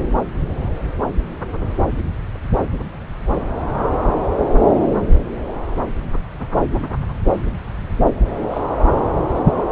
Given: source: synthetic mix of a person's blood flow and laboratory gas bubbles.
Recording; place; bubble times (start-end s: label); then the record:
Doppler ultrasound of blood flow; subclavian vein
8.50-8.62 s: bubbles
From the record:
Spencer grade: 1 (occasional bubble signal discernible with the cardiac motion signal, with majority of cardiac periods free of bubbles); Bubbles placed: anywhere in the cardiac cycle